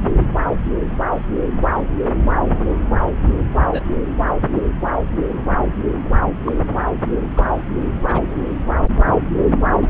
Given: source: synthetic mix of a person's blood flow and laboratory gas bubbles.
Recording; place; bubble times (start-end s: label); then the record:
Doppler ultrasound of blood flow; subclavian vein
3.73-3.80 s: bubbles
6.46-6.58 s: bubbles
7.36-7.47 s: bubbles
8.08-8.20 s: bubbles
9.74-9.88 s: bubbles
From the record:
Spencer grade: 2 (many but less than half of the cardiac periods contain bubble signals, singularly or in groups); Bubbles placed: anywhere in the cardiac cycle